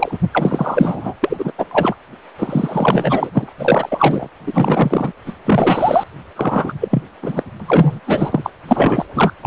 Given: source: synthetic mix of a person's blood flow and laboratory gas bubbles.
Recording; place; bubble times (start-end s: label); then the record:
Doppler ultrasound of blood flow; precordium
0.00-0.18 s: bubbles
0.32-1.14 s: bubbles
1.23-1.52 s: bubbles
1.58-1.66 s: bubbles
1.71-1.95 s: bubbles
2.38-3.30 s: bubbles
3.33-3.50 s: bubbles
3.58-4.29 s: bubbles
4.46-5.12 s: bubbles
5.25-5.33 s: bubbles
5.45-6.04 s: bubbles
6.35-6.73 s: bubbles
6.80-7.02 s: bubbles
7.22-7.43 s: bubbles
7.60-7.99 s: bubbles
8.07-8.52 s: bubbles
8.69-9.05 s: bubbles
9.15-9.33 s: bubbles
9.41-9.47 s: bubbles
From the record:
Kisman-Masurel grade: 343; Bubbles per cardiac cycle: rolling drumbeat, 9 or more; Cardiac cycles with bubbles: 100%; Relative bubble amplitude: loud (0.450 to 0.775); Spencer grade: 3 (all of the cardiac periods contain showers or single bubble signals, but not dominating or overriding the cardiac motion signals); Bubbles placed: anywhere in the cardiac cycle